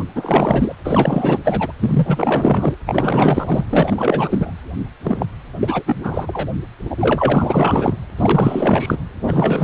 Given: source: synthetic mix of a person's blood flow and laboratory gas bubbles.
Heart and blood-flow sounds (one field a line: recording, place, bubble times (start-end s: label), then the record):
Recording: Doppler ultrasound of blood flow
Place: precordium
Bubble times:
0.00-0.05 s: bubbles
0.15-0.75 s: bubbles
0.85-1.39 s: bubbles
1.44-1.73 s: bubbles
1.79-2.77 s: bubbles
2.85-3.65 s: bubbles
3.69-4.52 s: bubbles
5.03-5.26 s: bubbles
5.60-5.83 s: bubbles
5.85-6.48 s: bubbles
6.89-7.96 s: bubbles
8.17-8.99 s: bubbles
9.25-9.64 s: bubbles
From the record:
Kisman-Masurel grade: 444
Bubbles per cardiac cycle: continuous sound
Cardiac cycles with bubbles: 100%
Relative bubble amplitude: maximal (0.775 to 0.999)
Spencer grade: 4 (maximum detectable bubble signal sounding continuously throughout systole and diastole of every cardiac period, and overriding the amplitude of the normal cardiac signals)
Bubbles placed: anywhere in the cardiac cycle